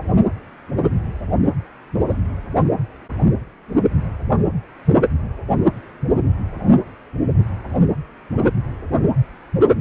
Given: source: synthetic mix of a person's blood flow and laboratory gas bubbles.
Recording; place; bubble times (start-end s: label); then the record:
Doppler ultrasound of blood flow; precordium
1.44-1.50 s: bubbles
1.94-2.22 s: bubbles
From the record:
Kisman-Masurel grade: 211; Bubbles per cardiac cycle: several, 3 to 8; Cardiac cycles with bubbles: 1 to 10%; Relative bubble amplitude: barely perceptible (0.100 to 0.250); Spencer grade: 1 (occasional bubble signal discernible with the cardiac motion signal, with majority of cardiac periods free of bubbles); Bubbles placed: anywhere in the cardiac cycle